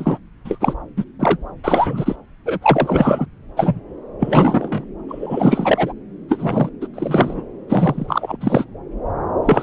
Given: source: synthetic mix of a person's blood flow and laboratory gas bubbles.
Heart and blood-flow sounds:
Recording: Doppler ultrasound of blood flow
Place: subclavian vein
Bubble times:
0.00-0.19 s: bubbles
0.45-0.73 s: bubbles
0.96-1.04 s: bubbles
1.19-1.37 s: bubbles
1.63-2.16 s: bubbles
2.45-2.59 s: bubbles
2.62-3.26 s: bubbles
3.56-3.81 s: bubbles
4.20-4.86 s: bubbles
5.08-5.92 s: bubbles
6.29-6.70 s: bubbles
6.81-6.87 s: bubbles
6.94-7.44 s: bubbles
7.68-8.37 s: bubbles
8.40-8.64 s: bubbles
9.45-9.63 s: bubbles
From the record:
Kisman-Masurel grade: 343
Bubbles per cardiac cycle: rolling drumbeat, 9 or more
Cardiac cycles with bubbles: 100%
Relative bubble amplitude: loud (0.450 to 0.775)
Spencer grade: 3 (all of the cardiac periods contain showers or single bubble signals, but not dominating or overriding the cardiac motion signals)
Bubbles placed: anywhere in the cardiac cycle

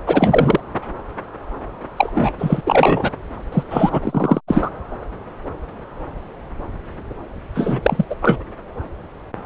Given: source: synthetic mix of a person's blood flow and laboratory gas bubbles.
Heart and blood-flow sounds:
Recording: Doppler ultrasound of blood flow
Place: subclavian vein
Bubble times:
0.06-0.60 s: bubbles
1.97-2.10 s: bubbles
2.14-2.33 s: bubbles
2.39-2.62 s: bubbles
2.66-3.11 s: bubbles
3.52-3.63 s: bubbles
3.70-4.40 s: bubbles
4.47-4.71 s: bubbles
7.54-8.04 s: bubbles
8.09-8.15 s: bubbles
8.22-8.38 s: bubbles
From the record:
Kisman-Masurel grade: 333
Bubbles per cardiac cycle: rolling drumbeat, 9 or more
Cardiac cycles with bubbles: 50 to 99%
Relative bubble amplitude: loud (0.450 to 0.775)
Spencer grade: 3 (all of the cardiac periods contain showers or single bubble signals, but not dominating or overriding the cardiac motion signals)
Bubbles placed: anywhere in the cardiac cycle

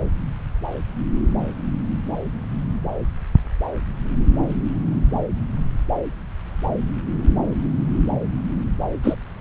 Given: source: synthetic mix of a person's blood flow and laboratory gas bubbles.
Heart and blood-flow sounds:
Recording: Doppler ultrasound of blood flow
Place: subclavian vein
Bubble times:
9.04-9.16 s: bubbles
From the record:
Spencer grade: 2 (many but less than half of the cardiac periods contain bubble signals, singularly or in groups)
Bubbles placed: anywhere in the cardiac cycle

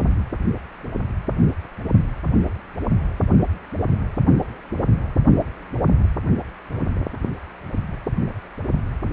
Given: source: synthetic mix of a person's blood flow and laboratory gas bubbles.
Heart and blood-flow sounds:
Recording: Doppler ultrasound of blood flow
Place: precordium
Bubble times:
no bubbles
From the record:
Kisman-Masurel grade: 000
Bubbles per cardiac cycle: 0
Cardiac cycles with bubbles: 0%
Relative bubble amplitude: no bubbles discernible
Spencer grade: 0 (complete lack of bubble signals)

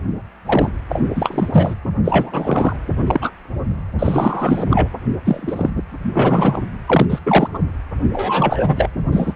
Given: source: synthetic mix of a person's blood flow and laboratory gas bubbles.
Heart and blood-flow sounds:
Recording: Doppler ultrasound of blood flow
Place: precordium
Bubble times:
0.46-0.71 s: bubbles
0.89-1.02 s: bubbles
1.16-1.74 s: bubbles
2.04-2.76 s: bubbles
3.06-3.31 s: bubbles
3.98-4.65 s: bubbles
4.69-4.88 s: bubbles
5.25-5.70 s: bubbles
6.12-6.62 s: bubbles
6.87-7.06 s: bubbles
7.10-7.19 s: bubbles
7.26-7.48 s: bubbles
7.54-7.58 s: bubbles
8.13-8.89 s: bubbles
9.12-9.33 s: bubbles
From the record:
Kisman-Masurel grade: 243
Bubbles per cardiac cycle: several, 3 to 8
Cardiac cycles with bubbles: 100%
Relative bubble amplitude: loud (0.450 to 0.775)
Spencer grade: 3 (all of the cardiac periods contain showers or single bubble signals, but not dominating or overriding the cardiac motion signals)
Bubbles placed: anywhere in the cardiac cycle

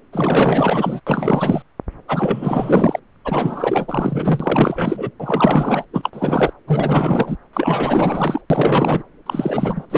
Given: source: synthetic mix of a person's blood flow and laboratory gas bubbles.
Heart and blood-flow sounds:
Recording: Doppler ultrasound of blood flow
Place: subclavian vein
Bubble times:
0.12-1.00 s: bubbles
1.06-1.62 s: bubbles
2.08-3.00 s: bubbles
3.25-5.11 s: bubbles
5.19-5.84 s: bubbles
5.93-6.10 s: bubbles
6.13-6.53 s: bubbles
6.67-7.36 s: bubbles
7.53-8.42 s: bubbles
8.50-9.03 s: bubbles
9.26-9.86 s: bubbles
9.90-9.97 s: bubbles
From the record:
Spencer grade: 4 (maximum detectable bubble signal sounding continuously throughout systole and diastole of every cardiac period, and overriding the amplitude of the normal cardiac signals)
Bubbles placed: anywhere in the cardiac cycle

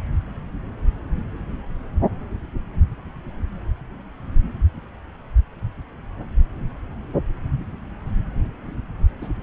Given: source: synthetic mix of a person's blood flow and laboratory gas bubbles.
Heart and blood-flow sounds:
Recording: Doppler ultrasound of blood flow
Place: subclavian vein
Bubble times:
9.21-9.28 s: bubbles
From the record:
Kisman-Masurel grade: 212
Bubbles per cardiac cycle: several, 3 to 8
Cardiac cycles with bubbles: 1 to 10%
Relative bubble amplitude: moderate (0.250 to 0.450)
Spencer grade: 1 (occasional bubble signal discernible with the cardiac motion signal, with majority of cardiac periods free of bubbles)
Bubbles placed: anywhere in the cardiac cycle

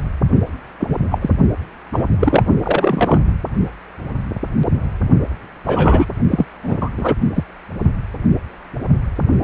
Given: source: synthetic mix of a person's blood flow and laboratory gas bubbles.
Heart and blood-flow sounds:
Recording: Doppler ultrasound of blood flow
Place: precordium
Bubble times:
0.79-0.96 s: bubbles
1.11-1.19 s: bubbles
1.21-1.30 s: bubbles
1.92-2.17 s: bubbles
2.20-2.43 s: bubbles
2.62-3.20 s: bubbles
5.64-6.06 s: bubbles
6.31-6.46 s: bubbles
6.62-6.78 s: bubbles
6.81-6.89 s: bubbles
6.97-7.14 s: bubbles
7.35-7.44 s: bubbles
From the record:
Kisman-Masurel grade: 233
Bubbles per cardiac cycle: several, 3 to 8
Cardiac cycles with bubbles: 50 to 99%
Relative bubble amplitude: loud (0.450 to 0.775)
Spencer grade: 3 (all of the cardiac periods contain showers or single bubble signals, but not dominating or overriding the cardiac motion signals)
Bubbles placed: only in the low amplitude regions of the cardiac cycle

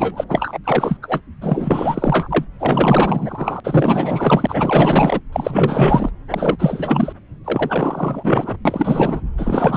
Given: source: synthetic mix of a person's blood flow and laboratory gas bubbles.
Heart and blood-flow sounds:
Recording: Doppler ultrasound of blood flow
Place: subclavian vein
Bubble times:
0.00-0.24 s: bubbles
0.29-0.58 s: bubbles
0.64-0.97 s: bubbles
1.02-1.20 s: bubbles
1.41-2.45 s: bubbles
2.60-3.60 s: bubbles
3.64-5.20 s: bubbles
5.32-6.11 s: bubbles
6.30-7.12 s: bubbles
7.44-8.57 s: bubbles
8.65-9.21 s: bubbles
9.38-9.76 s: bubbles
From the record:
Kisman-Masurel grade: 444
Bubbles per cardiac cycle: continuous sound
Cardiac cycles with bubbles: 100%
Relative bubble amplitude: maximal (0.775 to 0.999)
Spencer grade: 4 (maximum detectable bubble signal sounding continuously throughout systole and diastole of every cardiac period, and overriding the amplitude of the normal cardiac signals)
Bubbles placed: anywhere in the cardiac cycle

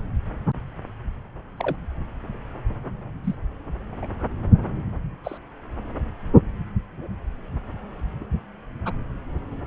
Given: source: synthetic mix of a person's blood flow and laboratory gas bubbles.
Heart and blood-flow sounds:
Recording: Doppler ultrasound of blood flow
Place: subclavian vein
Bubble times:
1.59-1.76 s: bubbles
3.24-3.35 s: bubbles
4.02-4.07 s: bubbles
5.24-5.38 s: bubbles
8.20-8.24 s: bubbles
8.85-8.92 s: bubbles
From the record:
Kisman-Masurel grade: 121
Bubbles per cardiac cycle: 1 to 2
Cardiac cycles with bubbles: 10 to 50%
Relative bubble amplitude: barely perceptible (0.100 to 0.250)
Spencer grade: 2 (many but less than half of the cardiac periods contain bubble signals, singularly or in groups)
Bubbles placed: anywhere in the cardiac cycle

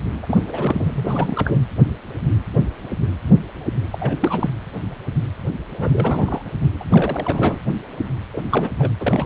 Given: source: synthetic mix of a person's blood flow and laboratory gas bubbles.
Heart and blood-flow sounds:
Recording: Doppler ultrasound of blood flow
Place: precordium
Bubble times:
0.22-0.38 s: bubbles
0.47-1.62 s: bubbles
3.92-4.18 s: bubbles
4.21-4.50 s: bubbles
5.73-6.42 s: bubbles
6.79-6.85 s: bubbles
6.88-7.58 s: bubbles
8.34-8.41 s: bubbles
8.50-8.70 s: bubbles
8.79-8.91 s: bubbles
9.00-9.26 s: bubbles
From the record:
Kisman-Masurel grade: 332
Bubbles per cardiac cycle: rolling drumbeat, 9 or more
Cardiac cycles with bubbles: 50 to 99%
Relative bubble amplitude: moderate (0.250 to 0.450)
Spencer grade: 3 (all of the cardiac periods contain showers or single bubble signals, but not dominating or overriding the cardiac motion signals)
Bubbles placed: anywhere in the cardiac cycle

